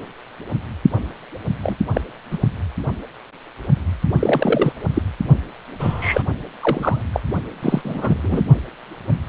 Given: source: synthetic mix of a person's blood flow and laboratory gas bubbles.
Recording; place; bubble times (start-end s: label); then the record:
Doppler ultrasound of blood flow; precordium
1.62-1.77 s: bubbles
1.94-2.01 s: bubbles
2.31-2.39 s: bubbles
4.19-4.72 s: bubbles
4.94-5.02 s: bubbles
5.79-6.24 s: bubbles
6.62-7.01 s: bubbles
7.13-7.20 s: bubbles
7.62-7.81 s: bubbles
7.84-8.17 s: bubbles
8.23-8.42 s: bubbles
From the record:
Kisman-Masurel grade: 232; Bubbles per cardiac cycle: several, 3 to 8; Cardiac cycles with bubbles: 50 to 99%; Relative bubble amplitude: moderate (0.250 to 0.450); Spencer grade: 3 (all of the cardiac periods contain showers or single bubble signals, but not dominating or overriding the cardiac motion signals); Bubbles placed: anywhere in the cardiac cycle